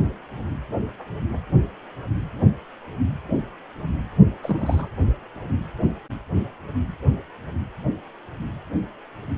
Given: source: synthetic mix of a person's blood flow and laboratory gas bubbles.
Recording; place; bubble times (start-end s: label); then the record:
Doppler ultrasound of blood flow; precordium
4.42-4.88 s: bubbles
From the record:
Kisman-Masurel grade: 211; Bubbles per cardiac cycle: several, 3 to 8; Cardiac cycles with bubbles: 1 to 10%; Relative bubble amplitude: barely perceptible (0.100 to 0.250); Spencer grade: 1 (occasional bubble signal discernible with the cardiac motion signal, with majority of cardiac periods free of bubbles); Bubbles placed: anywhere in the cardiac cycle